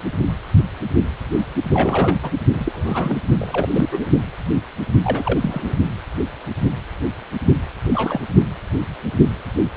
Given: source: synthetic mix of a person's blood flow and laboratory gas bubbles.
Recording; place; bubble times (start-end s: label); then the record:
Doppler ultrasound of blood flow; precordium
1.72-2.19 s: bubbles
2.23-2.31 s: bubbles
2.53-3.17 s: bubbles
3.39-3.67 s: bubbles
3.72-3.89 s: bubbles
3.92-4.07 s: bubbles
5.03-5.75 s: bubbles
7.94-8.21 s: bubbles
From the record:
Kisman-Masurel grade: 222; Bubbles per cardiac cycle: several, 3 to 8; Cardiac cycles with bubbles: 10 to 50%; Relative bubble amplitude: moderate (0.250 to 0.450); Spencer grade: 2 (many but less than half of the cardiac periods contain bubble signals, singularly or in groups); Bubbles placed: only in the low amplitude regions of the cardiac cycle